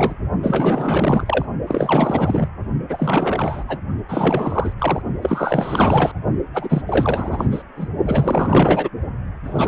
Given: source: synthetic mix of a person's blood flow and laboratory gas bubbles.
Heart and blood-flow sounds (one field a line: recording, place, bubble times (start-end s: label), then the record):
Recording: Doppler ultrasound of blood flow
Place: precordium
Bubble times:
0.00-0.15 s: bubbles
0.42-1.46 s: bubbles
1.67-2.48 s: bubbles
2.89-3.64 s: bubbles
3.68-3.79 s: bubbles
4.08-4.73 s: bubbles
4.78-5.02 s: bubbles
5.22-6.11 s: bubbles
6.53-6.82 s: bubbles
6.86-7.48 s: bubbles
7.51-7.63 s: bubbles
7.76-7.88 s: bubbles
8.06-8.89 s: bubbles
9.44-9.68 s: bubbles
From the record:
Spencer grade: 4 (maximum detectable bubble signal sounding continuously throughout systole and diastole of every cardiac period, and overriding the amplitude of the normal cardiac signals)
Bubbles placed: only in the low amplitude regions of the cardiac cycle